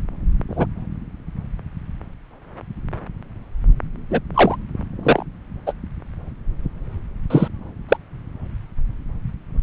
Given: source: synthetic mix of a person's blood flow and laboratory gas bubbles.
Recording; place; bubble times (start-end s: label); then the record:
Doppler ultrasound of blood flow; subclavian vein
0.49-0.66 s: bubbles
4.10-4.19 s: bubbles
4.34-4.56 s: bubbles
5.03-5.22 s: bubbles
5.67-5.73 s: bubbles
7.30-7.48 s: bubbles
7.88-7.97 s: bubbles
From the record:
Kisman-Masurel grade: 123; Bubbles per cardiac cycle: 1 to 2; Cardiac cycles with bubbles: 10 to 50%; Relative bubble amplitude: loud (0.450 to 0.775); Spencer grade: 2 (many but less than half of the cardiac periods contain bubble signals, singularly or in groups); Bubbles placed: anywhere in the cardiac cycle